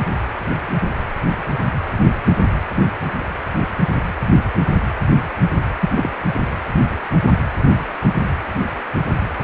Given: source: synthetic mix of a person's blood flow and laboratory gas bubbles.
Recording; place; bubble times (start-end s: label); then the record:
Doppler ultrasound of blood flow; precordium
5.80-5.89 s: bubbles
5.96-6.09 s: bubbles
From the record:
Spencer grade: 1 (occasional bubble signal discernible with the cardiac motion signal, with majority of cardiac periods free of bubbles); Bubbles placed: anywhere in the cardiac cycle